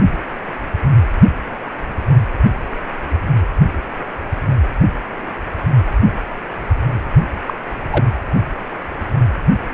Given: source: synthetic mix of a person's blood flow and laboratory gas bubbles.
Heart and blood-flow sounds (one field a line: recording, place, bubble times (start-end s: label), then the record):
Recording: Doppler ultrasound of blood flow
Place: precordium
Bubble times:
7.47-7.54 s: bubbles
7.92-8.08 s: bubbles
From the record:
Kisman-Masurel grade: 112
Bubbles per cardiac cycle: 1 to 2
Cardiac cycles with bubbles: 1 to 10%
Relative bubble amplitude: moderate (0.250 to 0.450)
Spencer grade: 1 (occasional bubble signal discernible with the cardiac motion signal, with majority of cardiac periods free of bubbles)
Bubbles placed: anywhere in the cardiac cycle